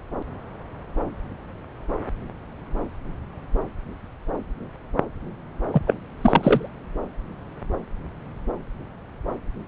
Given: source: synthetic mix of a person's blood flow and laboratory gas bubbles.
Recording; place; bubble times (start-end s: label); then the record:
Doppler ultrasound of blood flow; subclavian vein
5.72-5.81 s: bubbles
5.86-5.94 s: bubbles
6.21-6.69 s: bubbles
From the record:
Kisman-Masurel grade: 213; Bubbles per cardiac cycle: several, 3 to 8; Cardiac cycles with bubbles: 1 to 10%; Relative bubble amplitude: loud (0.450 to 0.775); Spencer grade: 1 (occasional bubble signal discernible with the cardiac motion signal, with majority of cardiac periods free of bubbles); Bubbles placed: anywhere in the cardiac cycle